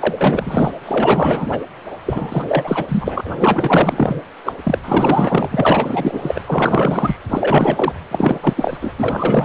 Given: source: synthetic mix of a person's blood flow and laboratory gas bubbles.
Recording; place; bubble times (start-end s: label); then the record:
Doppler ultrasound of blood flow; precordium
0.01-0.72 s: bubbles
0.85-1.59 s: bubbles
2.05-3.21 s: bubbles
3.23-4.21 s: bubbles
4.44-4.52 s: bubbles
4.63-4.79 s: bubbles
4.83-6.41 s: bubbles
6.46-7.17 s: bubbles
7.29-7.92 s: bubbles
8.11-8.38 s: bubbles
8.43-8.54 s: bubbles
8.57-8.77 s: bubbles
8.81-8.93 s: bubbles
8.98-9.45 s: bubbles
From the record:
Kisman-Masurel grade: 444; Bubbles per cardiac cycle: continuous sound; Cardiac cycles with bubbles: 100%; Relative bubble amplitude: maximal (0.775 to 0.999); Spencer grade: 4 (maximum detectable bubble signal sounding continuously throughout systole and diastole of every cardiac period, and overriding the amplitude of the normal cardiac signals); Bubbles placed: anywhere in the cardiac cycle